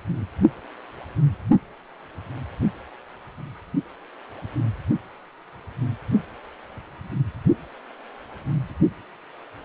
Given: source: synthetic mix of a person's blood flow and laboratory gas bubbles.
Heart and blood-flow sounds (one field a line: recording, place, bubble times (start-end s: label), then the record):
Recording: Doppler ultrasound of blood flow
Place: precordium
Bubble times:
no bubbles
From the record:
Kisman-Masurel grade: 000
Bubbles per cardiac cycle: 0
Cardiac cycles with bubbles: 0%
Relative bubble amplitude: no bubbles discernible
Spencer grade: 0 (complete lack of bubble signals)